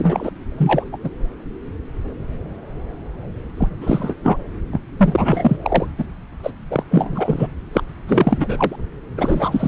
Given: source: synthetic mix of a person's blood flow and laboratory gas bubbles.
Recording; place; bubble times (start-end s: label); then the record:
Doppler ultrasound of blood flow; subclavian vein
0.00-0.30 s: bubbles
0.58-0.88 s: bubbles
0.92-0.96 s: bubbles
1.04-1.09 s: bubbles
3.57-3.68 s: bubbles
3.81-4.15 s: bubbles
4.23-4.38 s: bubbles
4.72-4.80 s: bubbles
4.98-5.58 s: bubbles
5.62-5.86 s: bubbles
5.98-6.04 s: bubbles
6.43-6.51 s: bubbles
6.71-6.83 s: bubbles
6.91-7.47 s: bubbles
7.73-7.82 s: bubbles
8.08-8.75 s: bubbles
9.17-9.68 s: bubbles
From the record:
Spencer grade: 3 (all of the cardiac periods contain showers or single bubble signals, but not dominating or overriding the cardiac motion signals); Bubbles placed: anywhere in the cardiac cycle